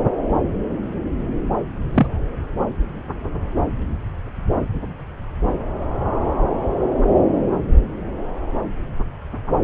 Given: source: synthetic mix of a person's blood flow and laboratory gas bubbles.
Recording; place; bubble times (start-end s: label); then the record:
Doppler ultrasound of blood flow; subclavian vein
1.94-2.07 s: bubbles
From the record:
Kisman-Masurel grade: 113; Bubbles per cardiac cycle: 1 to 2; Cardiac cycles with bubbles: 1 to 10%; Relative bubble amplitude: loud (0.450 to 0.775); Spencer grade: 1 (occasional bubble signal discernible with the cardiac motion signal, with majority of cardiac periods free of bubbles); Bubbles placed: anywhere in the cardiac cycle